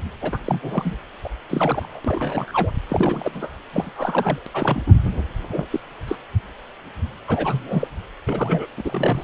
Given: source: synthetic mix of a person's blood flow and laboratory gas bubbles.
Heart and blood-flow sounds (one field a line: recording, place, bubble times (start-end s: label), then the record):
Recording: Doppler ultrasound of blood flow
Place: precordium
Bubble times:
0.22-0.38 s: bubbles
0.45-0.96 s: bubbles
1.23-1.28 s: bubbles
1.49-2.00 s: bubbles
2.04-2.71 s: bubbles
2.89-3.61 s: bubbles
3.72-4.42 s: bubbles
4.46-4.50 s: bubbles
4.54-4.80 s: bubbles
4.86-4.93 s: bubbles
5.49-5.64 s: bubbles
5.71-5.80 s: bubbles
6.08-6.16 s: bubbles
7.28-7.87 s: bubbles
8.26-8.67 s: bubbles
8.77-8.82 s: bubbles
8.85-9.24 s: bubbles
From the record:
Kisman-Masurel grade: 232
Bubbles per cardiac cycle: several, 3 to 8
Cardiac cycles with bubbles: 50 to 99%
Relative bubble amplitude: moderate (0.250 to 0.450)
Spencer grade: 3 (all of the cardiac periods contain showers or single bubble signals, but not dominating or overriding the cardiac motion signals)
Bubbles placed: anywhere in the cardiac cycle